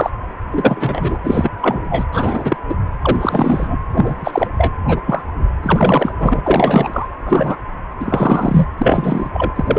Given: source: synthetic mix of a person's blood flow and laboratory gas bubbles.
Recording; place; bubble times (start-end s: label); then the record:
Doppler ultrasound of blood flow; precordium
0.00-0.10 s: bubbles
0.51-1.19 s: bubbles
1.23-1.50 s: bubbles
1.61-1.85 s: bubbles
1.90-2.06 s: bubbles
2.12-2.56 s: bubbles
2.69-2.75 s: bubbles
3.02-3.77 s: bubbles
3.92-4.48 s: bubbles
4.58-4.73 s: bubbles
4.88-5.00 s: bubbles
5.06-5.24 s: bubbles
5.62-6.12 s: bubbles
6.18-6.41 s: bubbles
6.44-7.08 s: bubbles
7.25-7.57 s: bubbles
8.00-8.66 s: bubbles
8.77-9.29 s: bubbles
9.32-9.52 s: bubbles
9.55-9.79 s: bubbles
From the record:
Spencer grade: 3 (all of the cardiac periods contain showers or single bubble signals, but not dominating or overriding the cardiac motion signals); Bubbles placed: anywhere in the cardiac cycle